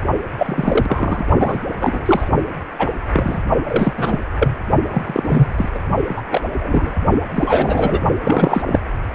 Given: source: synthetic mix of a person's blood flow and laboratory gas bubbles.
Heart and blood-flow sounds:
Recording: Doppler ultrasound of blood flow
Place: precordium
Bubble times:
0.38-1.27 s: bubbles
1.40-1.58 s: bubbles
1.80-2.29 s: bubbles
2.78-2.91 s: bubbles
3.13-3.40 s: bubbles
3.67-3.94 s: bubbles
3.96-4.19 s: bubbles
4.39-4.58 s: bubbles
4.90-5.69 s: bubbles
5.74-5.79 s: bubbles
6.08-6.22 s: bubbles
6.30-6.42 s: bubbles
6.53-6.97 s: bubbles
7.35-8.01 s: bubbles
8.23-8.64 s: bubbles
8.67-8.79 s: bubbles
From the record:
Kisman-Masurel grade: 243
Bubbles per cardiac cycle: several, 3 to 8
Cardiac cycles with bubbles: 100%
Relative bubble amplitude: loud (0.450 to 0.775)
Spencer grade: 3 (all of the cardiac periods contain showers or single bubble signals, but not dominating or overriding the cardiac motion signals)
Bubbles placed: only in the low amplitude regions of the cardiac cycle

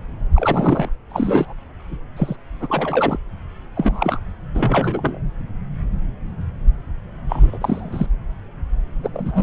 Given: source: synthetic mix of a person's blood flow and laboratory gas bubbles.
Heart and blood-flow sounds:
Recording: Doppler ultrasound of blood flow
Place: subclavian vein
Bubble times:
0.35-0.90 s: bubbles
1.10-1.53 s: bubbles
2.17-2.36 s: bubbles
2.60-3.20 s: bubbles
3.75-4.20 s: bubbles
4.54-5.20 s: bubbles
7.29-7.58 s: bubbles
7.61-8.06 s: bubbles
9.03-9.10 s: bubbles
9.13-9.43 s: bubbles
From the record:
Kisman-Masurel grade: 232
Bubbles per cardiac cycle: several, 3 to 8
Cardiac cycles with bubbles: 50 to 99%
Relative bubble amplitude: moderate (0.250 to 0.450)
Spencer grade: 3 (all of the cardiac periods contain showers or single bubble signals, but not dominating or overriding the cardiac motion signals)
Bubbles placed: anywhere in the cardiac cycle

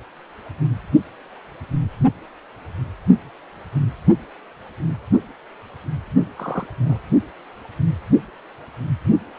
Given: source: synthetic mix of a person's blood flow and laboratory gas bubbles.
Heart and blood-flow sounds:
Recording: Doppler ultrasound of blood flow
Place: precordium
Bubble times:
6.36-6.67 s: bubbles
6.79-6.97 s: bubbles
From the record:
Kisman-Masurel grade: 121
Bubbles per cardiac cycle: 1 to 2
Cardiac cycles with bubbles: 10 to 50%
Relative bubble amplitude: barely perceptible (0.100 to 0.250)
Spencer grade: 2 (many but less than half of the cardiac periods contain bubble signals, singularly or in groups)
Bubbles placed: anywhere in the cardiac cycle

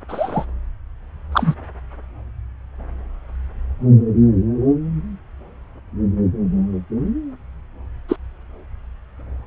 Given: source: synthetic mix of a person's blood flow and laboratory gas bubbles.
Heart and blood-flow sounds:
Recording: Doppler ultrasound of blood flow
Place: subclavian vein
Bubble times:
0.08-0.46 s: bubbles
1.32-1.54 s: bubbles
8.09-8.16 s: bubbles
From the record:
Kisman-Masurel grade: 123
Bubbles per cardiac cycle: 1 to 2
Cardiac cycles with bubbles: 10 to 50%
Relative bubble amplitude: loud (0.450 to 0.775)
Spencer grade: 2 (many but less than half of the cardiac periods contain bubble signals, singularly or in groups)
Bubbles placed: anywhere in the cardiac cycle

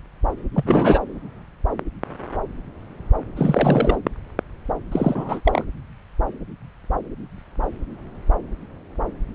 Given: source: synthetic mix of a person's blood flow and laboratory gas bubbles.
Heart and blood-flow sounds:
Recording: Doppler ultrasound of blood flow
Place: subclavian vein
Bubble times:
0.55-0.99 s: bubbles
3.36-3.96 s: bubbles
4.92-5.41 s: bubbles
5.45-5.64 s: bubbles
From the record:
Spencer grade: 2 (many but less than half of the cardiac periods contain bubble signals, singularly or in groups)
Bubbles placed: anywhere in the cardiac cycle

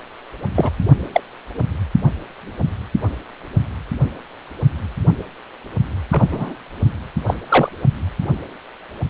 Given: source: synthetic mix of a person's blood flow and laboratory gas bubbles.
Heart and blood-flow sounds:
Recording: Doppler ultrasound of blood flow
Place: precordium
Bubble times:
0.55-0.71 s: bubbles
1.12-1.21 s: bubbles
6.11-6.56 s: bubbles
7.27-7.35 s: bubbles
7.49-7.70 s: bubbles
From the record:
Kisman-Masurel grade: 123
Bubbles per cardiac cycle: 1 to 2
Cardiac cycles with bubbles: 10 to 50%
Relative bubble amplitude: loud (0.450 to 0.775)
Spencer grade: 2 (many but less than half of the cardiac periods contain bubble signals, singularly or in groups)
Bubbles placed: only in the low amplitude regions of the cardiac cycle

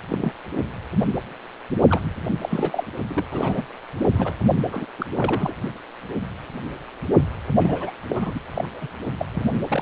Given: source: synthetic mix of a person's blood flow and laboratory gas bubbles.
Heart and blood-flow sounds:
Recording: Doppler ultrasound of blood flow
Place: precordium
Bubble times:
0.10-0.32 s: bubbles
1.88-2.01 s: bubbles
2.41-2.83 s: bubbles
3.07-3.25 s: bubbles
3.31-3.62 s: bubbles
4.04-4.33 s: bubbles
4.70-4.86 s: bubbles
4.98-5.06 s: bubbles
5.15-5.54 s: bubbles
7.55-7.92 s: bubbles
8.08-8.40 s: bubbles
8.55-8.88 s: bubbles
9.18-9.26 s: bubbles
9.32-9.82 s: bubbles
From the record:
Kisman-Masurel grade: 332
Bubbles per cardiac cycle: rolling drumbeat, 9 or more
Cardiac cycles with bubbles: 50 to 99%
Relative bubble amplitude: moderate (0.250 to 0.450)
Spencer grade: 3 (all of the cardiac periods contain showers or single bubble signals, but not dominating or overriding the cardiac motion signals)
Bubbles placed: only in the low amplitude regions of the cardiac cycle

